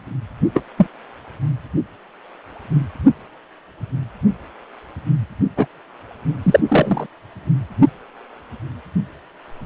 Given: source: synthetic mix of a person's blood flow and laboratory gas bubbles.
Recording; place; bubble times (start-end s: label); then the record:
Doppler ultrasound of blood flow; precordium
0.54-0.62 s: bubbles
0.77-0.87 s: bubbles
5.56-5.67 s: bubbles
6.43-6.60 s: bubbles
6.68-7.06 s: bubbles
From the record:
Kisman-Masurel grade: 123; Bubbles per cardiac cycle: 1 to 2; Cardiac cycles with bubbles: 10 to 50%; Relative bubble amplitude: loud (0.450 to 0.775); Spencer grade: 2 (many but less than half of the cardiac periods contain bubble signals, singularly or in groups); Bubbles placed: only in the low amplitude regions of the cardiac cycle